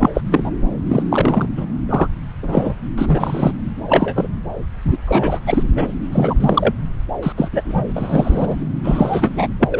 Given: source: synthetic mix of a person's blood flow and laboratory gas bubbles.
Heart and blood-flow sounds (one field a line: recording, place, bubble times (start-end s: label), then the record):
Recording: Doppler ultrasound of blood flow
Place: subclavian vein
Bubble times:
0.00-0.10 s: bubbles
0.14-0.22 s: bubbles
0.31-0.51 s: bubbles
0.88-1.02 s: bubbles
1.12-1.46 s: bubbles
1.57-1.65 s: bubbles
1.89-2.08 s: bubbles
2.43-2.75 s: bubbles
2.98-3.52 s: bubbles
3.87-4.28 s: bubbles
4.84-4.99 s: bubbles
5.05-5.40 s: bubbles
5.46-5.63 s: bubbles
5.75-5.93 s: bubbles
6.12-6.74 s: bubbles
7.23-7.33 s: bubbles
7.37-7.49 s: bubbles
7.52-8.56 s: bubbles
8.84-9.47 s: bubbles
9.60-9.67 s: bubbles
9.71-9.80 s: bubbles
From the record:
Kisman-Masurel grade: 243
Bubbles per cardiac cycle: several, 3 to 8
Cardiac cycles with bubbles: 100%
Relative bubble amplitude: loud (0.450 to 0.775)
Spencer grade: 3 (all of the cardiac periods contain showers or single bubble signals, but not dominating or overriding the cardiac motion signals)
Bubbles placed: anywhere in the cardiac cycle